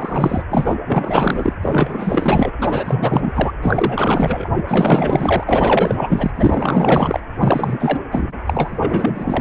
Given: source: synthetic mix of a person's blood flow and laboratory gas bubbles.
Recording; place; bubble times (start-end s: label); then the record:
Doppler ultrasound of blood flow; precordium
0.00-0.43 s: bubbles
0.51-0.77 s: bubbles
0.85-1.53 s: bubbles
1.62-2.51 s: bubbles
2.58-3.32 s: bubbles
3.35-3.52 s: bubbles
3.62-4.48 s: bubbles
4.56-4.63 s: bubbles
4.67-6.31 s: bubbles
6.37-7.20 s: bubbles
7.40-8.00 s: bubbles
8.11-8.33 s: bubbles
8.46-9.41 s: bubbles
From the record:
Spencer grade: 4 (maximum detectable bubble signal sounding continuously throughout systole and diastole of every cardiac period, and overriding the amplitude of the normal cardiac signals); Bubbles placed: anywhere in the cardiac cycle